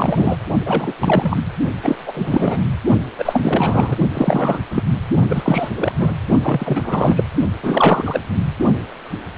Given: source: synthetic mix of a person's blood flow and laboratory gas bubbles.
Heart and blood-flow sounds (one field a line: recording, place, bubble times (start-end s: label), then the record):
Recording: Doppler ultrasound of blood flow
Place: precordium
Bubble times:
0.00-0.37 s: bubbles
0.66-0.93 s: bubbles
1.00-1.43 s: bubbles
1.82-2.64 s: bubbles
3.18-3.96 s: bubbles
4.13-4.60 s: bubbles
4.71-4.83 s: bubbles
5.29-5.69 s: bubbles
5.75-5.92 s: bubbles
5.99-6.14 s: bubbles
6.43-7.24 s: bubbles
7.62-8.21 s: bubbles
From the record:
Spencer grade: 3 (all of the cardiac periods contain showers or single bubble signals, but not dominating or overriding the cardiac motion signals)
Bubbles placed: only in the low amplitude regions of the cardiac cycle